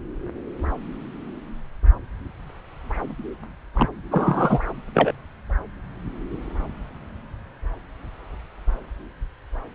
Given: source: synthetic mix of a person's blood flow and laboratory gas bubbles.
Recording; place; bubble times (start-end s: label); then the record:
Doppler ultrasound of blood flow; subclavian vein
3.74-3.89 s: bubbles
4.11-4.60 s: bubbles
4.94-5.12 s: bubbles
From the record:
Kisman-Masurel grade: 213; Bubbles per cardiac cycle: several, 3 to 8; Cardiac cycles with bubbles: 1 to 10%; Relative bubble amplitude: loud (0.450 to 0.775); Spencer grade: 1 (occasional bubble signal discernible with the cardiac motion signal, with majority of cardiac periods free of bubbles); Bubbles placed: anywhere in the cardiac cycle